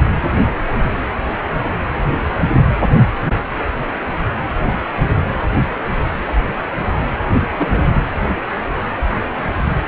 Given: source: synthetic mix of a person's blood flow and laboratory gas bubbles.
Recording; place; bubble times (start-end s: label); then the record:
Doppler ultrasound of blood flow; precordium
7.25-7.29 s: bubbles
7.50-7.89 s: bubbles
From the record:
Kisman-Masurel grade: 211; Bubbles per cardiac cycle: several, 3 to 8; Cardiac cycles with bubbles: 1 to 10%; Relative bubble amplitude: barely perceptible (0.100 to 0.250); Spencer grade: 1 (occasional bubble signal discernible with the cardiac motion signal, with majority of cardiac periods free of bubbles); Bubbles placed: anywhere in the cardiac cycle